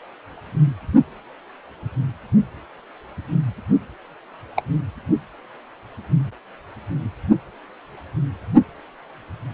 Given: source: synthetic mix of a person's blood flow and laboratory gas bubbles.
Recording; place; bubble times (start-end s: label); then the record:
Doppler ultrasound of blood flow; precordium
4.56-4.62 s: bubbles
From the record:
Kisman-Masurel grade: 112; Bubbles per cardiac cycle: 1 to 2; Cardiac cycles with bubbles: 1 to 10%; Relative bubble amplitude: moderate (0.250 to 0.450); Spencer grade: 1 (occasional bubble signal discernible with the cardiac motion signal, with majority of cardiac periods free of bubbles); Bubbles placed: only in the low amplitude regions of the cardiac cycle